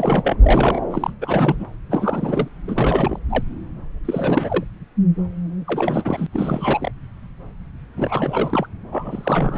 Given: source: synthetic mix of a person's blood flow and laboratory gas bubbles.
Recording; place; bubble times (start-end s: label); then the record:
Doppler ultrasound of blood flow; subclavian vein
0.00-0.37 s: bubbles
0.43-0.80 s: bubbles
0.91-1.13 s: bubbles
1.21-1.67 s: bubbles
1.90-2.48 s: bubbles
2.67-3.19 s: bubbles
3.29-3.44 s: bubbles
4.04-4.63 s: bubbles
5.67-6.26 s: bubbles
6.33-6.92 s: bubbles
7.98-8.67 s: bubbles
8.92-9.58 s: bubbles
From the record:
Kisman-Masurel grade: 332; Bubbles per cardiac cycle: rolling drumbeat, 9 or more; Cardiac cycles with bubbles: 50 to 99%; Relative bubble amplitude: moderate (0.250 to 0.450); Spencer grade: 3 (all of the cardiac periods contain showers or single bubble signals, but not dominating or overriding the cardiac motion signals); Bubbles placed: anywhere in the cardiac cycle